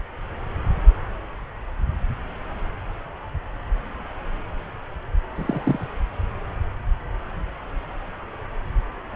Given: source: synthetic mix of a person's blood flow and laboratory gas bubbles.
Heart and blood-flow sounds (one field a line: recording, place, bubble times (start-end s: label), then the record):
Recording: Doppler ultrasound of blood flow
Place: subclavian vein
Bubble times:
5.35-5.87 s: bubbles
From the record:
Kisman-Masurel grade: 112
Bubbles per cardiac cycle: 1 to 2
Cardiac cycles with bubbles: 1 to 10%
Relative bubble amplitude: moderate (0.250 to 0.450)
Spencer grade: 1 (occasional bubble signal discernible with the cardiac motion signal, with majority of cardiac periods free of bubbles)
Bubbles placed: anywhere in the cardiac cycle